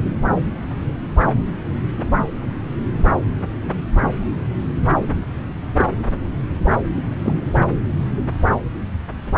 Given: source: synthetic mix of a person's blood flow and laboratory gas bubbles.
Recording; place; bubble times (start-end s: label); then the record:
Doppler ultrasound of blood flow; subclavian vein
5.78-5.85 s: bubbles
7.24-7.33 s: bubbles
From the record:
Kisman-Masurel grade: 122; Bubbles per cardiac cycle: 1 to 2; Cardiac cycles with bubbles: 10 to 50%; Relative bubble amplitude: moderate (0.250 to 0.450); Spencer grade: 2 (many but less than half of the cardiac periods contain bubble signals, singularly or in groups); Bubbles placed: anywhere in the cardiac cycle